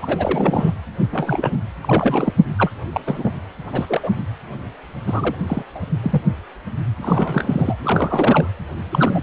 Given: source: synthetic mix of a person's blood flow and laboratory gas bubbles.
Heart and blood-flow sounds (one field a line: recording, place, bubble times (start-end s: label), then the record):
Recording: Doppler ultrasound of blood flow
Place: precordium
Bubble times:
0.01-0.74 s: bubbles
1.12-1.59 s: bubbles
1.83-2.32 s: bubbles
2.57-2.70 s: bubbles
2.92-3.00 s: bubbles
3.05-3.31 s: bubbles
3.72-3.85 s: bubbles
3.89-4.00 s: bubbles
4.03-4.11 s: bubbles
5.06-5.35 s: bubbles
5.46-5.62 s: bubbles
5.75-5.82 s: bubbles
6.02-6.22 s: bubbles
7.01-7.76 s: bubbles
7.81-8.48 s: bubbles
8.91-9.23 s: bubbles
From the record:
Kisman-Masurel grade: 332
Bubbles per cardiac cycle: rolling drumbeat, 9 or more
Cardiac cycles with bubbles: 50 to 99%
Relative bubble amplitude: moderate (0.250 to 0.450)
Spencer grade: 3 (all of the cardiac periods contain showers or single bubble signals, but not dominating or overriding the cardiac motion signals)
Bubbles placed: anywhere in the cardiac cycle